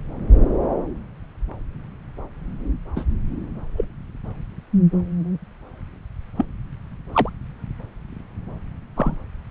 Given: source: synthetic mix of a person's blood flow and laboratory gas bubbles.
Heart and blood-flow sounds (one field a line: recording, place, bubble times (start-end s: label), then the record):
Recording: Doppler ultrasound of blood flow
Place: subclavian vein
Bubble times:
2.96-3.04 s: bubbles
3.77-3.85 s: bubbles
6.37-6.45 s: bubbles
7.12-7.30 s: bubbles
8.96-9.16 s: bubbles
From the record:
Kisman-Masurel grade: 123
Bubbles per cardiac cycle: 1 to 2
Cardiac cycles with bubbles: 10 to 50%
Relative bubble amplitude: loud (0.450 to 0.775)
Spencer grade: 2 (many but less than half of the cardiac periods contain bubble signals, singularly or in groups)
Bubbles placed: anywhere in the cardiac cycle